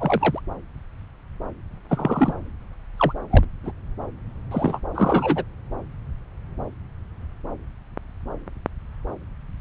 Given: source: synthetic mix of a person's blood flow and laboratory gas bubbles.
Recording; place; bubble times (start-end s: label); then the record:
Doppler ultrasound of blood flow; subclavian vein
0.00-0.40 s: bubbles
1.89-2.34 s: bubbles
2.98-3.13 s: bubbles
3.30-3.45 s: bubbles
3.63-3.72 s: bubbles
4.51-4.80 s: bubbles
4.94-5.44 s: bubbles
From the record:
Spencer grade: 3 (all of the cardiac periods contain showers or single bubble signals, but not dominating or overriding the cardiac motion signals); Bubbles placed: anywhere in the cardiac cycle